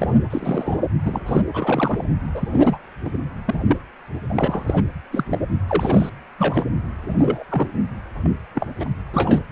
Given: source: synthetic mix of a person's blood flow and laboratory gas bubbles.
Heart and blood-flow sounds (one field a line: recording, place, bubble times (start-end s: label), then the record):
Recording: Doppler ultrasound of blood flow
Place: precordium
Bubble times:
0.00-0.18 s: bubbles
0.30-0.77 s: bubbles
1.03-1.20 s: bubbles
1.26-1.42 s: bubbles
1.53-2.04 s: bubbles
2.34-2.48 s: bubbles
2.52-2.77 s: bubbles
3.04-3.18 s: bubbles
3.46-3.77 s: bubbles
4.29-4.82 s: bubbles
5.12-5.39 s: bubbles
5.68-6.10 s: bubbles
6.38-6.64 s: bubbles
7.09-7.16 s: bubbles
7.19-7.44 s: bubbles
7.49-7.72 s: bubbles
8.22-8.30 s: bubbles
8.55-8.89 s: bubbles
9.13-9.40 s: bubbles
From the record:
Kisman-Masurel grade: 242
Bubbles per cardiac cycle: several, 3 to 8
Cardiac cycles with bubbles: 100%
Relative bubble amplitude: moderate (0.250 to 0.450)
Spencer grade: 3 (all of the cardiac periods contain showers or single bubble signals, but not dominating or overriding the cardiac motion signals)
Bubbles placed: anywhere in the cardiac cycle